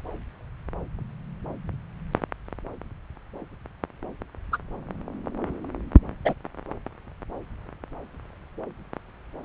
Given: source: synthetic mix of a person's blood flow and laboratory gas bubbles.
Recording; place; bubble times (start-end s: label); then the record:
Doppler ultrasound of blood flow; subclavian vein
4.52-4.58 s: bubbles
6.25-6.34 s: bubbles
From the record:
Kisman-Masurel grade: 113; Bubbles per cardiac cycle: 1 to 2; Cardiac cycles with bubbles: 1 to 10%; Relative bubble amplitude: loud (0.450 to 0.775); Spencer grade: 1 (occasional bubble signal discernible with the cardiac motion signal, with majority of cardiac periods free of bubbles); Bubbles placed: anywhere in the cardiac cycle